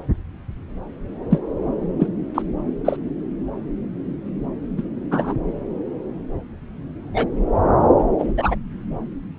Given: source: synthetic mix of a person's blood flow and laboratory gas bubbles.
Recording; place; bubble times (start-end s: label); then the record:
Doppler ultrasound of blood flow; subclavian vein
1.30-1.40 s: bubbles
1.99-2.08 s: bubbles
2.34-2.42 s: bubbles
2.84-2.96 s: bubbles
4.76-4.83 s: bubbles
5.11-5.33 s: bubbles
7.13-7.26 s: bubbles
8.18-8.32 s: bubbles
8.37-8.55 s: bubbles
From the record:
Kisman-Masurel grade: 123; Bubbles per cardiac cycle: 1 to 2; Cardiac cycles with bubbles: 10 to 50%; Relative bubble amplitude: loud (0.450 to 0.775); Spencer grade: 2 (many but less than half of the cardiac periods contain bubble signals, singularly or in groups); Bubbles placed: anywhere in the cardiac cycle